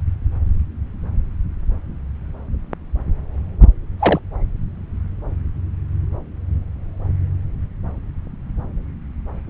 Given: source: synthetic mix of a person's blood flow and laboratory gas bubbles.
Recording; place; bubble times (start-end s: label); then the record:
Doppler ultrasound of blood flow; subclavian vein
3.99-4.19 s: bubbles
From the record:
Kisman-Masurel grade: 113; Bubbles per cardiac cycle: 1 to 2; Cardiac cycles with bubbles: 1 to 10%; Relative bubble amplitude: loud (0.450 to 0.775); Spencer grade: 1 (occasional bubble signal discernible with the cardiac motion signal, with majority of cardiac periods free of bubbles); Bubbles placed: anywhere in the cardiac cycle